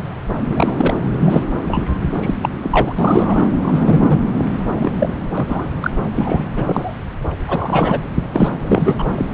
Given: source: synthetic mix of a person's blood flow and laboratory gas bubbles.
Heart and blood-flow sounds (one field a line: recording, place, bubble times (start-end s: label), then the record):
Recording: Doppler ultrasound of blood flow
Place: subclavian vein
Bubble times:
0.49-0.94 s: bubbles
1.21-1.44 s: bubbles
1.68-1.83 s: bubbles
2.14-2.34 s: bubbles
2.42-2.50 s: bubbles
2.63-2.93 s: bubbles
2.96-3.47 s: bubbles
3.61-4.20 s: bubbles
4.71-4.92 s: bubbles
5.00-5.12 s: bubbles
5.37-5.70 s: bubbles
5.80-5.91 s: bubbles
6.15-6.44 s: bubbles
6.55-6.99 s: bubbles
7.48-8.01 s: bubbles
8.32-8.49 s: bubbles
8.67-9.09 s: bubbles
9.17-9.25 s: bubbles
From the record:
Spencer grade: 3 (all of the cardiac periods contain showers or single bubble signals, but not dominating or overriding the cardiac motion signals)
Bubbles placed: anywhere in the cardiac cycle